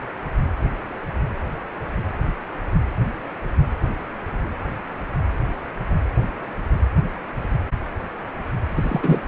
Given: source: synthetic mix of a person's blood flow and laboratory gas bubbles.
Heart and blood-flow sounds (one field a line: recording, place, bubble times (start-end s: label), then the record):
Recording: Doppler ultrasound of blood flow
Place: precordium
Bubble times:
8.69-9.21 s: bubbles
From the record:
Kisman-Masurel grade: 212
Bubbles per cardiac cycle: several, 3 to 8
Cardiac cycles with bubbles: 1 to 10%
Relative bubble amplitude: moderate (0.250 to 0.450)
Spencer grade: 1 (occasional bubble signal discernible with the cardiac motion signal, with majority of cardiac periods free of bubbles)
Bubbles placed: anywhere in the cardiac cycle